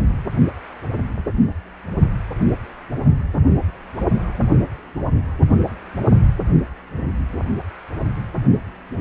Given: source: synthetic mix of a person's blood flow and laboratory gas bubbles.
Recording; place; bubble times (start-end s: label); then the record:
Doppler ultrasound of blood flow; precordium
no bubbles
From the record:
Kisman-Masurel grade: 000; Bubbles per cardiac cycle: 0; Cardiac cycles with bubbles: 0%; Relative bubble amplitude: no bubbles discernible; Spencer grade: 0 (complete lack of bubble signals)